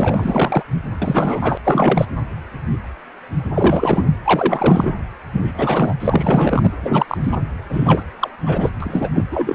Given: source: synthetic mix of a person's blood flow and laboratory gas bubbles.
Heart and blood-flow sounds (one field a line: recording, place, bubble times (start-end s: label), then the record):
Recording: Doppler ultrasound of blood flow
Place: precordium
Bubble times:
0.00-0.62 s: bubbles
1.01-1.57 s: bubbles
1.65-2.05 s: bubbles
3.54-4.08 s: bubbles
4.24-4.93 s: bubbles
5.33-5.53 s: bubbles
5.56-5.94 s: bubbles
6.00-6.71 s: bubbles
6.83-7.17 s: bubbles
7.23-7.38 s: bubbles
7.70-8.04 s: bubbles
8.20-8.30 s: bubbles
8.46-8.71 s: bubbles
8.80-9.09 s: bubbles
9.14-9.23 s: bubbles
9.31-9.55 s: bubbles
From the record:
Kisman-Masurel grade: 333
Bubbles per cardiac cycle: rolling drumbeat, 9 or more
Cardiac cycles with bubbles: 50 to 99%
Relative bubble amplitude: loud (0.450 to 0.775)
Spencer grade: 3 (all of the cardiac periods contain showers or single bubble signals, but not dominating or overriding the cardiac motion signals)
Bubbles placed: anywhere in the cardiac cycle